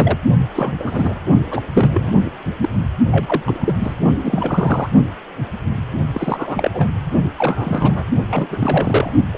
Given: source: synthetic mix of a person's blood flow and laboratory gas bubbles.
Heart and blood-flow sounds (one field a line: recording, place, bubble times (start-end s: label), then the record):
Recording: Doppler ultrasound of blood flow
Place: precordium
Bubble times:
0.00-0.18 s: bubbles
0.54-0.77 s: bubbles
0.80-1.14 s: bubbles
1.50-1.62 s: bubbles
1.73-2.14 s: bubbles
2.24-2.33 s: bubbles
2.60-2.69 s: bubbles
3.11-3.42 s: bubbles
3.45-3.76 s: bubbles
3.80-3.94 s: bubbles
4.23-4.90 s: bubbles
6.14-6.88 s: bubbles
7.36-8.07 s: bubbles
8.27-8.47 s: bubbles
8.50-9.11 s: bubbles
9.33-9.37 s: bubbles
From the record:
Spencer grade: 3 (all of the cardiac periods contain showers or single bubble signals, but not dominating or overriding the cardiac motion signals)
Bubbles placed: only in the low amplitude regions of the cardiac cycle